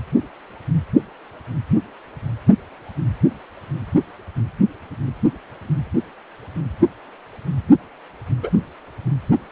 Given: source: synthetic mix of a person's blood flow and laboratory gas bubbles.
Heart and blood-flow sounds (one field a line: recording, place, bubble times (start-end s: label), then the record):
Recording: Doppler ultrasound of blood flow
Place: precordium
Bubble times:
8.42-8.50 s: bubbles
From the record:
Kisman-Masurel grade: 112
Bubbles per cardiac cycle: 1 to 2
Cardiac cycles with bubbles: 1 to 10%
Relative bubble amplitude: moderate (0.250 to 0.450)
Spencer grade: 1 (occasional bubble signal discernible with the cardiac motion signal, with majority of cardiac periods free of bubbles)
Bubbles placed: anywhere in the cardiac cycle